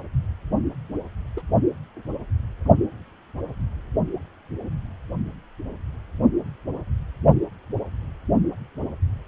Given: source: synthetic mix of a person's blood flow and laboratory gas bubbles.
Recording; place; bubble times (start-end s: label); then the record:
Doppler ultrasound of blood flow; precordium
1.36-1.42 s: bubbles
From the record:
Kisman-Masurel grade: 112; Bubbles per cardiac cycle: 1 to 2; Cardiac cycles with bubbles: 1 to 10%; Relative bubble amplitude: moderate (0.250 to 0.450); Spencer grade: 1 (occasional bubble signal discernible with the cardiac motion signal, with majority of cardiac periods free of bubbles); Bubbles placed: only in the low amplitude regions of the cardiac cycle